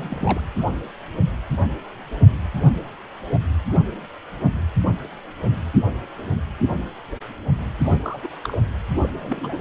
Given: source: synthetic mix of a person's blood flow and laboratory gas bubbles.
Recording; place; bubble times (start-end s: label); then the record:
Doppler ultrasound of blood flow; precordium
0.00-0.41 s: bubbles
7.80-8.27 s: bubbles
8.43-8.57 s: bubbles
9.01-9.09 s: bubbles
9.12-9.61 s: bubbles
From the record:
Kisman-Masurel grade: 221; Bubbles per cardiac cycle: several, 3 to 8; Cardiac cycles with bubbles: 10 to 50%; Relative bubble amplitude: barely perceptible (0.100 to 0.250); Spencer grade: 2 (many but less than half of the cardiac periods contain bubble signals, singularly or in groups); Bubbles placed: anywhere in the cardiac cycle